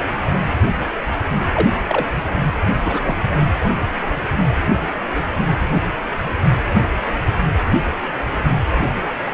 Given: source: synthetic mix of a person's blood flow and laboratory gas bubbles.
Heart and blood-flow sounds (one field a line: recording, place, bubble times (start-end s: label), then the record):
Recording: Doppler ultrasound of blood flow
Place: precordium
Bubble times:
1.52-1.67 s: bubbles
1.87-2.07 s: bubbles
2.83-3.16 s: bubbles
From the record:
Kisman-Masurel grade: 122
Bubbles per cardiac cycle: 1 to 2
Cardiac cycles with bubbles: 10 to 50%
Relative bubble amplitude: moderate (0.250 to 0.450)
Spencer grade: 2 (many but less than half of the cardiac periods contain bubble signals, singularly or in groups)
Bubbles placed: anywhere in the cardiac cycle